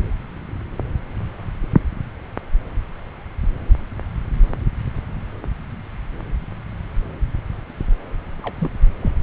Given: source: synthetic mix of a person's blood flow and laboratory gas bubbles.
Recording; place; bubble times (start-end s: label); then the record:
Doppler ultrasound of blood flow; subclavian vein
8.43-8.53 s: bubbles
8.60-8.71 s: bubbles
9.02-9.12 s: bubbles
From the record:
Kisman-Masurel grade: 211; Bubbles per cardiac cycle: several, 3 to 8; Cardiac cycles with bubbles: 1 to 10%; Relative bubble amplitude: barely perceptible (0.100 to 0.250); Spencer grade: 1 (occasional bubble signal discernible with the cardiac motion signal, with majority of cardiac periods free of bubbles); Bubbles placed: anywhere in the cardiac cycle